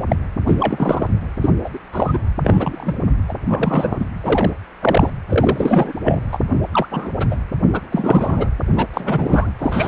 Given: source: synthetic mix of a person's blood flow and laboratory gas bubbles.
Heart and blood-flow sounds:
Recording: Doppler ultrasound of blood flow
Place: precordium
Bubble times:
0.09-0.16 s: bubbles
0.46-0.57 s: bubbles
0.59-1.07 s: bubbles
1.41-1.49 s: bubbles
1.64-1.69 s: bubbles
1.74-1.78 s: bubbles
1.92-2.19 s: bubbles
2.44-2.96 s: bubbles
3.29-3.34 s: bubbles
3.48-4.05 s: bubbles
4.23-4.52 s: bubbles
4.81-5.10 s: bubbles
5.29-5.94 s: bubbles
6.04-6.20 s: bubbles
6.32-6.39 s: bubbles
6.71-6.87 s: bubbles
6.91-7.11 s: bubbles
7.20-7.27 s: bubbles
7.31-7.36 s: bubbles
7.73-7.81 s: bubbles
7.92-8.50 s: bubbles
8.76-8.87 s: bubbles
8.94-9.51 s: bubbles
9.59-9.88 s: bubbles
From the record:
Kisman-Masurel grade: 243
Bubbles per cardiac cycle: several, 3 to 8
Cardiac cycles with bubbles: 100%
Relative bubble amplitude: loud (0.450 to 0.775)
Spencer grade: 3 (all of the cardiac periods contain showers or single bubble signals, but not dominating or overriding the cardiac motion signals)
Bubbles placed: anywhere in the cardiac cycle

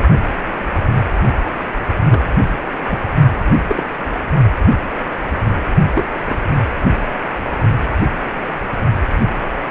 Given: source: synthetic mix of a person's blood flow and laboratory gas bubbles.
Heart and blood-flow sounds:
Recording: Doppler ultrasound of blood flow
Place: precordium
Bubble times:
2.10-2.29 s: bubbles
2.89-2.99 s: bubbles
3.67-3.86 s: bubbles
5.93-6.04 s: bubbles
6.28-6.40 s: bubbles
From the record:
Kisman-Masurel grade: 122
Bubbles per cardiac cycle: 1 to 2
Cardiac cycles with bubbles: 10 to 50%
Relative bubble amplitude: moderate (0.250 to 0.450)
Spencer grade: 2 (many but less than half of the cardiac periods contain bubble signals, singularly or in groups)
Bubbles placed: only in the low amplitude regions of the cardiac cycle

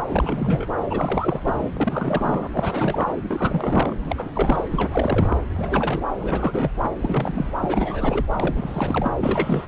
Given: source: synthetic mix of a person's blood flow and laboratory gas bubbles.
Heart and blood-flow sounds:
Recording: Doppler ultrasound of blood flow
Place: subclavian vein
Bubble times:
0.07-0.67 s: bubbles
0.90-1.70 s: bubbles
1.73-2.48 s: bubbles
2.52-3.15 s: bubbles
3.23-3.95 s: bubbles
4.04-4.29 s: bubbles
4.35-4.64 s: bubbles
4.71-5.37 s: bubbles
5.54-6.03 s: bubbles
6.19-6.71 s: bubbles
6.98-7.57 s: bubbles
7.61-8.24 s: bubbles
8.36-9.11 s: bubbles
9.18-9.68 s: bubbles
From the record:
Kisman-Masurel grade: 342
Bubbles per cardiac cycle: rolling drumbeat, 9 or more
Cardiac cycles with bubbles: 100%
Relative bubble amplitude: moderate (0.250 to 0.450)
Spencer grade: 3 (all of the cardiac periods contain showers or single bubble signals, but not dominating or overriding the cardiac motion signals)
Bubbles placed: anywhere in the cardiac cycle

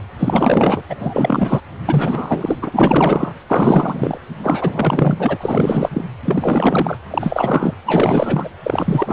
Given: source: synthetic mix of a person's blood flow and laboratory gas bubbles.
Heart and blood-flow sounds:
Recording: Doppler ultrasound of blood flow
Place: precordium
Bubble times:
0.18-0.82 s: bubbles
0.90-0.95 s: bubbles
0.99-1.60 s: bubbles
1.85-2.57 s: bubbles
2.62-2.69 s: bubbles
2.73-3.33 s: bubbles
3.50-4.17 s: bubbles
4.43-5.38 s: bubbles
5.40-5.89 s: bubbles
5.92-6.04 s: bubbles
6.25-6.97 s: bubbles
7.10-7.75 s: bubbles
7.85-8.49 s: bubbles
8.63-9.13 s: bubbles
From the record:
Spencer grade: 4 (maximum detectable bubble signal sounding continuously throughout systole and diastole of every cardiac period, and overriding the amplitude of the normal cardiac signals)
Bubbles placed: anywhere in the cardiac cycle

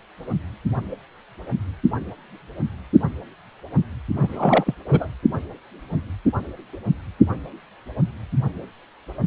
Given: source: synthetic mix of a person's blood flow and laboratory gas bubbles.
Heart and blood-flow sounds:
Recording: Doppler ultrasound of blood flow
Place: precordium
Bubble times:
4.16-4.75 s: bubbles
4.90-5.08 s: bubbles
From the record:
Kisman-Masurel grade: 212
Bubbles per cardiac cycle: several, 3 to 8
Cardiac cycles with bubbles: 1 to 10%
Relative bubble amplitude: moderate (0.250 to 0.450)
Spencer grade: 1 (occasional bubble signal discernible with the cardiac motion signal, with majority of cardiac periods free of bubbles)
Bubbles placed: only in the low amplitude regions of the cardiac cycle

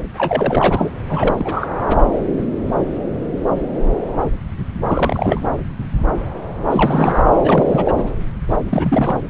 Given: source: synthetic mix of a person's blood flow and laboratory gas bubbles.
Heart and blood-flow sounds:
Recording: Doppler ultrasound of blood flow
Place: subclavian vein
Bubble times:
0.00-0.03 s: bubbles
0.17-0.93 s: bubbles
1.09-1.35 s: bubbles
1.39-1.67 s: bubbles
1.88-1.96 s: bubbles
4.87-5.47 s: bubbles
6.71-7.21 s: bubbles
7.42-8.04 s: bubbles
8.69-9.19 s: bubbles
From the record:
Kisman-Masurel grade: 332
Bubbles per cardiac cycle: rolling drumbeat, 9 or more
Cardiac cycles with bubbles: 50 to 99%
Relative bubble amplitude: moderate (0.250 to 0.450)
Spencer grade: 3 (all of the cardiac periods contain showers or single bubble signals, but not dominating or overriding the cardiac motion signals)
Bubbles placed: anywhere in the cardiac cycle

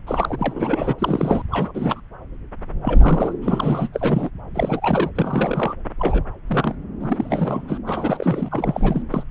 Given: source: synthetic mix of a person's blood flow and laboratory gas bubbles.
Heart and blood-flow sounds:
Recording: Doppler ultrasound of blood flow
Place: subclavian vein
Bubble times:
0.07-0.94 s: bubbles
0.98-1.43 s: bubbles
1.51-1.72 s: bubbles
1.74-2.00 s: bubbles
2.82-3.33 s: bubbles
3.42-3.88 s: bubbles
3.92-4.29 s: bubbles
4.54-5.10 s: bubbles
5.15-5.73 s: bubbles
5.98-6.24 s: bubbles
6.47-6.75 s: bubbles
7.00-7.78 s: bubbles
7.86-8.48 s: bubbles
8.51-9.02 s: bubbles
9.10-9.23 s: bubbles
From the record:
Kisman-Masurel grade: 332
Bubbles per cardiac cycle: rolling drumbeat, 9 or more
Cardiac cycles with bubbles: 50 to 99%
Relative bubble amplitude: moderate (0.250 to 0.450)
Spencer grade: 3 (all of the cardiac periods contain showers or single bubble signals, but not dominating or overriding the cardiac motion signals)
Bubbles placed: anywhere in the cardiac cycle

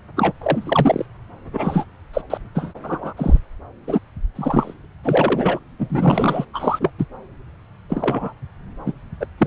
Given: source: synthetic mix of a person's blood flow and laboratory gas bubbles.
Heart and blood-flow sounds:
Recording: Doppler ultrasound of blood flow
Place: subclavian vein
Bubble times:
0.16-0.32 s: bubbles
0.41-1.06 s: bubbles
1.52-1.85 s: bubbles
2.13-2.22 s: bubbles
2.30-2.38 s: bubbles
2.55-2.73 s: bubbles
2.83-3.13 s: bubbles
3.17-3.39 s: bubbles
3.86-3.99 s: bubbles
4.35-4.73 s: bubbles
5.04-5.59 s: bubbles
5.79-6.45 s: bubbles
6.53-6.90 s: bubbles
6.98-7.05 s: bubbles
7.89-8.33 s: bubbles
8.86-8.92 s: bubbles
9.20-9.27 s: bubbles
9.38-9.47 s: bubbles
From the record:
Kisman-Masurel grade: 243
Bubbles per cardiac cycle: several, 3 to 8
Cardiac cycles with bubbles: 100%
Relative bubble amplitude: loud (0.450 to 0.775)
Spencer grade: 3 (all of the cardiac periods contain showers or single bubble signals, but not dominating or overriding the cardiac motion signals)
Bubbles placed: anywhere in the cardiac cycle

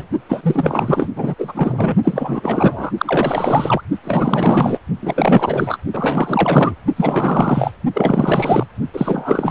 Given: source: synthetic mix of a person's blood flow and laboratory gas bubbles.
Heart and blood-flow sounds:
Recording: Doppler ultrasound of blood flow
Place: precordium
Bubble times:
0.00-0.07 s: bubbles
0.29-1.09 s: bubbles
1.16-1.34 s: bubbles
1.38-1.95 s: bubbles
2.04-2.91 s: bubbles
2.97-3.82 s: bubbles
4.04-4.79 s: bubbles
5.02-5.78 s: bubbles
5.93-6.75 s: bubbles
6.96-7.71 s: bubbles
7.93-8.66 s: bubbles
8.93-9.51 s: bubbles
From the record:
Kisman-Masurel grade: 444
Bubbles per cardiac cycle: continuous sound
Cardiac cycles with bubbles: 100%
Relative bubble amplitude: maximal (0.775 to 0.999)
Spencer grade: 4 (maximum detectable bubble signal sounding continuously throughout systole and diastole of every cardiac period, and overriding the amplitude of the normal cardiac signals)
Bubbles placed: only in the low amplitude regions of the cardiac cycle

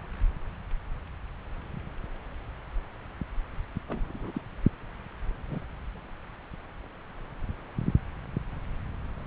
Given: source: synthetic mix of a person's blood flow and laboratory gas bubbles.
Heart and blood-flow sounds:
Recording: Doppler ultrasound of blood flow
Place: subclavian vein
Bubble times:
3.88-4.42 s: bubbles
5.49-5.59 s: bubbles
From the record:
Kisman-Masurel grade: 121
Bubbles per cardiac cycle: 1 to 2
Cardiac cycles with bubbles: 10 to 50%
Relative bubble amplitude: barely perceptible (0.100 to 0.250)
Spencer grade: 2 (many but less than half of the cardiac periods contain bubble signals, singularly or in groups)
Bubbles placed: anywhere in the cardiac cycle

